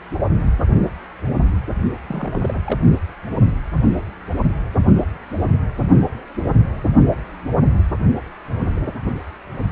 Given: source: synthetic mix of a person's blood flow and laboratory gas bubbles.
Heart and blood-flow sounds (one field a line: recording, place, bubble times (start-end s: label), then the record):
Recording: Doppler ultrasound of blood flow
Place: precordium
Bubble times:
2.07-2.62 s: bubbles
2.66-2.79 s: bubbles
From the record:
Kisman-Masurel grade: 211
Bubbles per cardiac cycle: several, 3 to 8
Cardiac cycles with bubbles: 1 to 10%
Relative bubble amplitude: barely perceptible (0.100 to 0.250)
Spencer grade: 1 (occasional bubble signal discernible with the cardiac motion signal, with majority of cardiac periods free of bubbles)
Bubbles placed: only in the low amplitude regions of the cardiac cycle